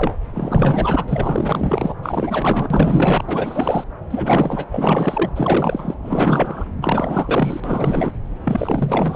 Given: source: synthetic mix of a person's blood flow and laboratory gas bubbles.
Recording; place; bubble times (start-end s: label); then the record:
Doppler ultrasound of blood flow; subclavian vein
0.00-0.16 s: bubbles
0.34-1.05 s: bubbles
1.08-1.95 s: bubbles
2.03-3.85 s: bubbles
4.10-4.66 s: bubbles
4.71-5.29 s: bubbles
5.35-5.95 s: bubbles
6.02-6.65 s: bubbles
6.81-7.60 s: bubbles
7.64-8.12 s: bubbles
8.44-9.16 s: bubbles
From the record:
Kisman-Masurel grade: 444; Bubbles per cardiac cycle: continuous sound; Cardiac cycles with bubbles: 100%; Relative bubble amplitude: maximal (0.775 to 0.999); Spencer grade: 4 (maximum detectable bubble signal sounding continuously throughout systole and diastole of every cardiac period, and overriding the amplitude of the normal cardiac signals); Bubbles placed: anywhere in the cardiac cycle